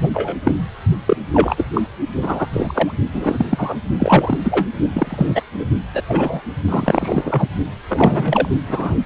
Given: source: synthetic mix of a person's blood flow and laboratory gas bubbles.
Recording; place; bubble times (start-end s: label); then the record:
Doppler ultrasound of blood flow; precordium
0.00-0.08 s: bubbles
0.14-0.35 s: bubbles
0.44-0.54 s: bubbles
1.06-1.17 s: bubbles
1.33-1.65 s: bubbles
1.74-1.81 s: bubbles
2.22-2.46 s: bubbles
2.52-2.92 s: bubbles
3.12-3.46 s: bubbles
3.50-3.79 s: bubbles
3.99-4.38 s: bubbles
4.43-4.67 s: bubbles
4.92-5.42 s: bubbles
5.58-5.66 s: bubbles
5.93-6.02 s: bubbles
6.08-6.41 s: bubbles
6.68-7.47 s: bubbles
7.88-8.49 s: bubbles
8.68-8.95 s: bubbles
From the record:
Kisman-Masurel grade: 233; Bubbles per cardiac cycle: several, 3 to 8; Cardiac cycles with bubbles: 50 to 99%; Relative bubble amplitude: loud (0.450 to 0.775); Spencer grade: 3 (all of the cardiac periods contain showers or single bubble signals, but not dominating or overriding the cardiac motion signals); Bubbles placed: only in the low amplitude regions of the cardiac cycle